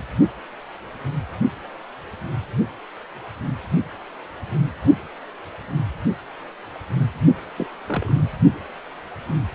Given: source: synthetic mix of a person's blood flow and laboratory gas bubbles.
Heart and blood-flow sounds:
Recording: Doppler ultrasound of blood flow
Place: precordium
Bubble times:
7.57-7.67 s: bubbles
7.87-8.19 s: bubbles
From the record:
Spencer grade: 1 (occasional bubble signal discernible with the cardiac motion signal, with majority of cardiac periods free of bubbles)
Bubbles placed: anywhere in the cardiac cycle

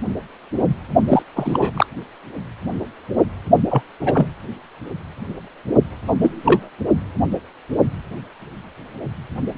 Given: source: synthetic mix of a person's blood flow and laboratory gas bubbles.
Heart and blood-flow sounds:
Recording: Doppler ultrasound of blood flow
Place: precordium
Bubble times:
1.08-1.22 s: bubbles
1.35-1.71 s: bubbles
1.75-1.86 s: bubbles
3.71-3.83 s: bubbles
4.00-4.28 s: bubbles
6.08-6.13 s: bubbles
6.21-6.69 s: bubbles
From the record:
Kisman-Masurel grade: 223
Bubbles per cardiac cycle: several, 3 to 8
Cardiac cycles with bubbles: 10 to 50%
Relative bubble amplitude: loud (0.450 to 0.775)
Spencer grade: 2 (many but less than half of the cardiac periods contain bubble signals, singularly or in groups)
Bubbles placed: only in the low amplitude regions of the cardiac cycle

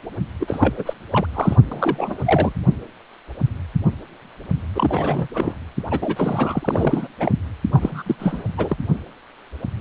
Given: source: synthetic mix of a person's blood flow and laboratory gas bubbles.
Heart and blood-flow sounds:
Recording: Doppler ultrasound of blood flow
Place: precordium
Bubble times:
0.40-0.74 s: bubbles
0.78-0.93 s: bubbles
1.11-1.26 s: bubbles
1.33-1.56 s: bubbles
1.71-2.53 s: bubbles
4.75-5.28 s: bubbles
5.34-5.54 s: bubbles
5.91-5.99 s: bubbles
6.02-7.08 s: bubbles
7.19-7.32 s: bubbles
7.72-8.03 s: bubbles
8.06-8.15 s: bubbles
8.19-8.44 s: bubbles
8.57-8.77 s: bubbles
From the record:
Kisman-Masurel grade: 332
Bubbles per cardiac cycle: rolling drumbeat, 9 or more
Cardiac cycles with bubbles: 50 to 99%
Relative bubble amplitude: moderate (0.250 to 0.450)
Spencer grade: 3 (all of the cardiac periods contain showers or single bubble signals, but not dominating or overriding the cardiac motion signals)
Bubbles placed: anywhere in the cardiac cycle

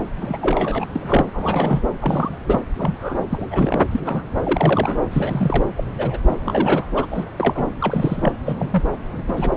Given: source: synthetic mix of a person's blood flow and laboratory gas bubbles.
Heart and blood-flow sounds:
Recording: Doppler ultrasound of blood flow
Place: subclavian vein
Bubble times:
0.21-0.39 s: bubbles
0.41-0.86 s: bubbles
0.95-1.31 s: bubbles
1.33-1.80 s: bubbles
2.01-2.39 s: bubbles
2.46-2.60 s: bubbles
2.78-3.19 s: bubbles
3.30-3.46 s: bubbles
3.51-3.80 s: bubbles
3.91-4.00 s: bubbles
4.05-4.25 s: bubbles
4.43-4.99 s: bubbles
5.10-5.64 s: bubbles
5.76-5.84 s: bubbles
5.97-6.18 s: bubbles
6.28-6.36 s: bubbles
6.46-6.85 s: bubbles
6.94-7.05 s: bubbles
7.11-7.25 s: bubbles
7.36-7.71 s: bubbles
7.81-8.32 s: bubbles
8.47-8.83 s: bubbles
9.16-9.23 s: bubbles
9.28-9.49 s: bubbles
From the record:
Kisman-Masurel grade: 242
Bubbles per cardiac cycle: several, 3 to 8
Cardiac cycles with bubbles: 100%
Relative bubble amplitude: moderate (0.250 to 0.450)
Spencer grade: 3 (all of the cardiac periods contain showers or single bubble signals, but not dominating or overriding the cardiac motion signals)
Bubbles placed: anywhere in the cardiac cycle

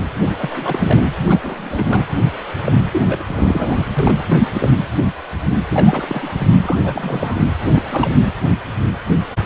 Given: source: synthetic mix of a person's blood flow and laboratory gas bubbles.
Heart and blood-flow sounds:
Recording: Doppler ultrasound of blood flow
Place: precordium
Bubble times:
0.21-0.32 s: bubbles
0.37-1.03 s: bubbles
1.26-2.06 s: bubbles
2.65-2.73 s: bubbles
2.92-3.23 s: bubbles
3.29-3.86 s: bubbles
3.99-4.23 s: bubbles
4.27-4.38 s: bubbles
4.54-4.70 s: bubbles
5.70-6.46 s: bubbles
6.50-6.56 s: bubbles
6.62-7.45 s: bubbles
7.73-7.82 s: bubbles
7.88-8.12 s: bubbles
8.21-8.34 s: bubbles
From the record:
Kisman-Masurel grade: 332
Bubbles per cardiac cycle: rolling drumbeat, 9 or more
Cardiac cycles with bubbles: 50 to 99%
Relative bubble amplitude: moderate (0.250 to 0.450)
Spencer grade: 3 (all of the cardiac periods contain showers or single bubble signals, but not dominating or overriding the cardiac motion signals)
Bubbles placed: anywhere in the cardiac cycle

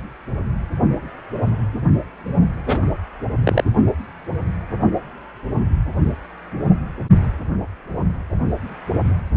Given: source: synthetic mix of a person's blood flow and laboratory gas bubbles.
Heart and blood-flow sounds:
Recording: Doppler ultrasound of blood flow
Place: precordium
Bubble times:
2.65-2.80 s: bubbles
3.43-3.64 s: bubbles
From the record:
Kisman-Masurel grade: 123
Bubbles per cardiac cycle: 1 to 2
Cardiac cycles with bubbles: 10 to 50%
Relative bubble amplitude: loud (0.450 to 0.775)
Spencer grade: 2 (many but less than half of the cardiac periods contain bubble signals, singularly or in groups)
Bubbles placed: only in the low amplitude regions of the cardiac cycle

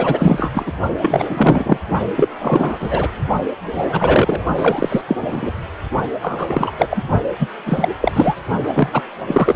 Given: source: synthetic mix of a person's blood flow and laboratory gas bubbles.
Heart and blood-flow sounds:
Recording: Doppler ultrasound of blood flow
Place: precordium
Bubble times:
0.00-0.50 s: bubbles
0.54-0.72 s: bubbles
1.01-1.78 s: bubbles
2.15-2.29 s: bubbles
2.38-3.08 s: bubbles
3.71-4.44 s: bubbles
4.57-5.02 s: bubbles
5.08-5.16 s: bubbles
5.21-5.52 s: bubbles
6.21-6.71 s: bubbles
6.78-6.87 s: bubbles
6.91-7.03 s: bubbles
7.39-7.48 s: bubbles
7.66-7.89 s: bubbles
8.01-8.35 s: bubbles
8.75-9.02 s: bubbles
9.28-9.56 s: bubbles
From the record:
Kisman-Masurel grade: 343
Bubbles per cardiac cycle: rolling drumbeat, 9 or more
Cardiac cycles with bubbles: 100%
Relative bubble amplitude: loud (0.450 to 0.775)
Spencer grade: 3 (all of the cardiac periods contain showers or single bubble signals, but not dominating or overriding the cardiac motion signals)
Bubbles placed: only in the low amplitude regions of the cardiac cycle

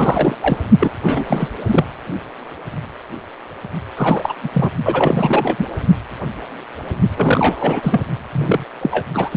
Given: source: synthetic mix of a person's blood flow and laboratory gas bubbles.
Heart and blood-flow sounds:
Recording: Doppler ultrasound of blood flow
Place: precordium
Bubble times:
0.00-0.36 s: bubbles
0.41-0.57 s: bubbles
0.79-0.93 s: bubbles
1.03-1.25 s: bubbles
1.27-1.49 s: bubbles
1.67-1.85 s: bubbles
3.96-4.33 s: bubbles
4.43-4.50 s: bubbles
4.54-4.70 s: bubbles
4.84-5.67 s: bubbles
7.16-8.01 s: bubbles
8.32-8.64 s: bubbles
8.81-9.07 s: bubbles
9.14-9.37 s: bubbles
From the record:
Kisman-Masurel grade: 333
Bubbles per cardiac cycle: rolling drumbeat, 9 or more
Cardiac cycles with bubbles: 50 to 99%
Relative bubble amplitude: loud (0.450 to 0.775)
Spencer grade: 3 (all of the cardiac periods contain showers or single bubble signals, but not dominating or overriding the cardiac motion signals)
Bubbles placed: only in the low amplitude regions of the cardiac cycle

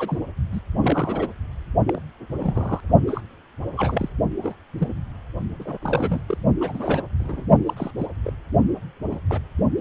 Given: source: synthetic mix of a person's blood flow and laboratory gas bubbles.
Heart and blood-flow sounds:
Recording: Doppler ultrasound of blood flow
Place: precordium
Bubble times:
0.00-0.18 s: bubbles
0.52-0.59 s: bubbles
0.81-1.28 s: bubbles
1.87-2.00 s: bubbles
2.32-2.81 s: bubbles
3.06-3.22 s: bubbles
3.77-4.09 s: bubbles
4.42-4.54 s: bubbles
4.78-4.88 s: bubbles
5.59-5.78 s: bubbles
5.81-6.21 s: bubbles
6.26-6.38 s: bubbles
6.60-7.02 s: bubbles
7.19-7.44 s: bubbles
7.66-7.73 s: bubbles
7.76-7.91 s: bubbles
7.97-8.07 s: bubbles
8.24-8.33 s: bubbles
9.11-9.18 s: bubbles
9.29-9.40 s: bubbles
9.77-9.81 s: bubbles
From the record:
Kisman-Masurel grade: 242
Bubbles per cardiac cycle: several, 3 to 8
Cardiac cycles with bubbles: 100%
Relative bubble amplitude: moderate (0.250 to 0.450)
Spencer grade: 3 (all of the cardiac periods contain showers or single bubble signals, but not dominating or overriding the cardiac motion signals)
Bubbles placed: only in the low amplitude regions of the cardiac cycle

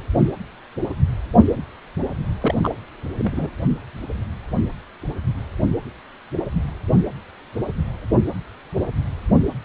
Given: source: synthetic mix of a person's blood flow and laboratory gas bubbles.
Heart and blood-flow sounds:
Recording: Doppler ultrasound of blood flow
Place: precordium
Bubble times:
2.41-2.55 s: bubbles
2.62-2.75 s: bubbles
3.19-3.50 s: bubbles
From the record:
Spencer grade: 1 (occasional bubble signal discernible with the cardiac motion signal, with majority of cardiac periods free of bubbles)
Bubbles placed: anywhere in the cardiac cycle

